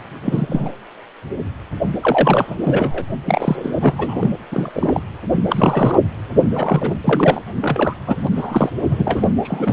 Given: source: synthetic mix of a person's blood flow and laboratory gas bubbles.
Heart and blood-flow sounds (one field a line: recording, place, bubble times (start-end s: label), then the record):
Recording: Doppler ultrasound of blood flow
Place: precordium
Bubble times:
0.22-0.71 s: bubbles
2.00-2.54 s: bubbles
2.63-3.05 s: bubbles
3.25-3.71 s: bubbles
3.80-4.31 s: bubbles
4.52-5.03 s: bubbles
5.49-5.98 s: bubbles
6.50-6.97 s: bubbles
7.04-7.41 s: bubbles
7.60-7.96 s: bubbles
8.06-8.16 s: bubbles
8.22-8.27 s: bubbles
8.35-8.70 s: bubbles
8.91-9.28 s: bubbles
9.42-9.73 s: bubbles
From the record:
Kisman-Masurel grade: 233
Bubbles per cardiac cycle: several, 3 to 8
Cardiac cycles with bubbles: 50 to 99%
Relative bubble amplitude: loud (0.450 to 0.775)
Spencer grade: 3 (all of the cardiac periods contain showers or single bubble signals, but not dominating or overriding the cardiac motion signals)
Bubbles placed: anywhere in the cardiac cycle